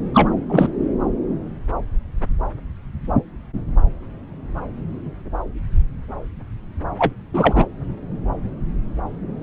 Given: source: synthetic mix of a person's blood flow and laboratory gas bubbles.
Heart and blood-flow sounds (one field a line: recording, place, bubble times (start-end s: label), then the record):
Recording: Doppler ultrasound of blood flow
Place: subclavian vein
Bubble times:
0.14-0.29 s: bubbles
0.49-0.67 s: bubbles
6.98-7.13 s: bubbles
7.33-7.67 s: bubbles
From the record:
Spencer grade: 1 (occasional bubble signal discernible with the cardiac motion signal, with majority of cardiac periods free of bubbles)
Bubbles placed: anywhere in the cardiac cycle